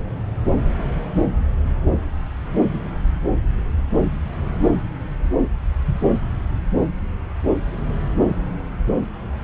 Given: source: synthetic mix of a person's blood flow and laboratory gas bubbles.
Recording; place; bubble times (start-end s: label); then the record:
Doppler ultrasound of blood flow; subclavian vein
no bubbles
From the record:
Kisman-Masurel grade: 000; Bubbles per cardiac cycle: 0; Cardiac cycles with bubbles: 0%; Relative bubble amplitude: no bubbles discernible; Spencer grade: 0 (complete lack of bubble signals)